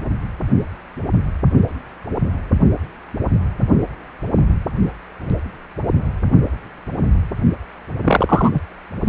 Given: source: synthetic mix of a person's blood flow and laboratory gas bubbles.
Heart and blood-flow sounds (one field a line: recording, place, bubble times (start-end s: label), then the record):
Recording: Doppler ultrasound of blood flow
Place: precordium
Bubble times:
8.04-8.50 s: bubbles
8.54-8.60 s: bubbles
From the record:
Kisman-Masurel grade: 213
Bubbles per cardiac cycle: several, 3 to 8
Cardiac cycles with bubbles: 1 to 10%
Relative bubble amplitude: loud (0.450 to 0.775)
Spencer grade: 1 (occasional bubble signal discernible with the cardiac motion signal, with majority of cardiac periods free of bubbles)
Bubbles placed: only in the low amplitude regions of the cardiac cycle